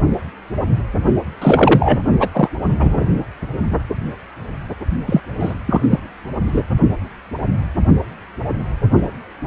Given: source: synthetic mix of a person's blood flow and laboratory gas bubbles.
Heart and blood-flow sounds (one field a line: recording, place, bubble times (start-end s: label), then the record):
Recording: Doppler ultrasound of blood flow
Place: precordium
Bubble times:
1.42-2.02 s: bubbles
2.19-2.29 s: bubbles
2.33-2.49 s: bubbles
2.79-3.06 s: bubbles
5.06-5.20 s: bubbles
5.39-5.54 s: bubbles
5.67-5.81 s: bubbles
5.90-6.00 s: bubbles
6.44-6.63 s: bubbles
From the record:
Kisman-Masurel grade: 223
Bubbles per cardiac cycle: several, 3 to 8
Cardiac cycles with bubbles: 10 to 50%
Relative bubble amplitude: loud (0.450 to 0.775)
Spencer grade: 2 (many but less than half of the cardiac periods contain bubble signals, singularly or in groups)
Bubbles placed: only in the low amplitude regions of the cardiac cycle